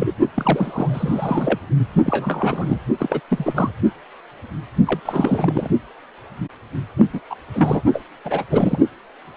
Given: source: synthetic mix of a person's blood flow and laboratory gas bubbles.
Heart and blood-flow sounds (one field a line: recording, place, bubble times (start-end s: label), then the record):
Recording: Doppler ultrasound of blood flow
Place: precordium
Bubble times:
0.00-0.11 s: bubbles
0.34-1.59 s: bubbles
2.02-2.79 s: bubbles
3.00-3.20 s: bubbles
3.29-3.72 s: bubbles
4.86-5.00 s: bubbles
5.05-5.70 s: bubbles
6.96-7.07 s: bubbles
7.13-7.20 s: bubbles
7.30-7.35 s: bubbles
7.53-7.83 s: bubbles
7.93-8.03 s: bubbles
8.24-8.44 s: bubbles
8.50-8.79 s: bubbles
From the record:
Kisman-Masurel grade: 332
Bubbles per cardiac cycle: rolling drumbeat, 9 or more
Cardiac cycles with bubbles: 50 to 99%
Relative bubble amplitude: moderate (0.250 to 0.450)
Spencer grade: 3 (all of the cardiac periods contain showers or single bubble signals, but not dominating or overriding the cardiac motion signals)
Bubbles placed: only in the low amplitude regions of the cardiac cycle